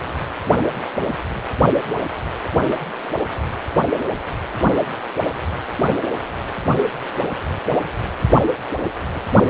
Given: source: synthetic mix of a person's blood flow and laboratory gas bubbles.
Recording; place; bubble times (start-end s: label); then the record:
Doppler ultrasound of blood flow; precordium
9.15-9.20 s: bubbles
From the record:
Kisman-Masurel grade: 111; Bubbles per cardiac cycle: 1 to 2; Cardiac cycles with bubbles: 1 to 10%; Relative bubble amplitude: barely perceptible (0.100 to 0.250); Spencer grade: 1 (occasional bubble signal discernible with the cardiac motion signal, with majority of cardiac periods free of bubbles); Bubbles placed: anywhere in the cardiac cycle